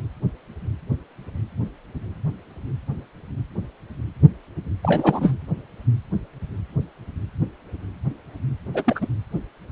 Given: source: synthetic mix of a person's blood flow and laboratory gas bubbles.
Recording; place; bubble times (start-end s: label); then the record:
Doppler ultrasound of blood flow; precordium
4.83-5.33 s: bubbles
8.74-9.06 s: bubbles
From the record:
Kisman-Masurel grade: 222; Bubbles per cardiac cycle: several, 3 to 8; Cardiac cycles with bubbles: 10 to 50%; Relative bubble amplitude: moderate (0.250 to 0.450); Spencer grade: 2 (many but less than half of the cardiac periods contain bubble signals, singularly or in groups); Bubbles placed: anywhere in the cardiac cycle